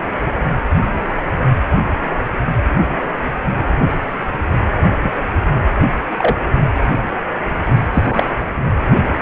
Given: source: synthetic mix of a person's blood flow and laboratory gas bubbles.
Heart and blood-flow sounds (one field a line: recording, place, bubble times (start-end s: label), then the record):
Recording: Doppler ultrasound of blood flow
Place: precordium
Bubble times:
4.79-5.13 s: bubbles
6.18-6.34 s: bubbles
7.92-8.26 s: bubbles
From the record:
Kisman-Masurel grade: 123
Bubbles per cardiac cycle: 1 to 2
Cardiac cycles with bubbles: 10 to 50%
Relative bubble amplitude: loud (0.450 to 0.775)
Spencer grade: 2 (many but less than half of the cardiac periods contain bubble signals, singularly or in groups)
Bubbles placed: anywhere in the cardiac cycle